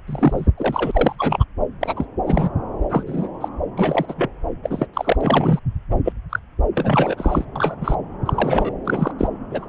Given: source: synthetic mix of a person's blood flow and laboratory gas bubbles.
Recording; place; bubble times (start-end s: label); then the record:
Doppler ultrasound of blood flow; subclavian vein
0.07-0.47 s: bubbles
0.57-1.15 s: bubbles
1.19-1.44 s: bubbles
1.81-2.06 s: bubbles
2.25-2.50 s: bubbles
2.90-3.04 s: bubbles
3.06-3.28 s: bubbles
3.41-3.49 s: bubbles
3.77-4.05 s: bubbles
4.08-4.14 s: bubbles
4.17-4.30 s: bubbles
4.63-4.87 s: bubbles
4.94-5.17 s: bubbles
5.21-5.59 s: bubbles
5.90-5.95 s: bubbles
6.04-6.12 s: bubbles
6.29-6.40 s: bubbles
6.75-7.45 s: bubbles
7.55-7.75 s: bubbles
7.81-7.94 s: bubbles
8.25-8.72 s: bubbles
8.85-9.11 s: bubbles
9.18-9.27 s: bubbles
9.51-9.67 s: bubbles
From the record:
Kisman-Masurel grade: 242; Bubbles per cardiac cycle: several, 3 to 8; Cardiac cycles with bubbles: 100%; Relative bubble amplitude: moderate (0.250 to 0.450); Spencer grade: 3 (all of the cardiac periods contain showers or single bubble signals, but not dominating or overriding the cardiac motion signals); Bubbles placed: anywhere in the cardiac cycle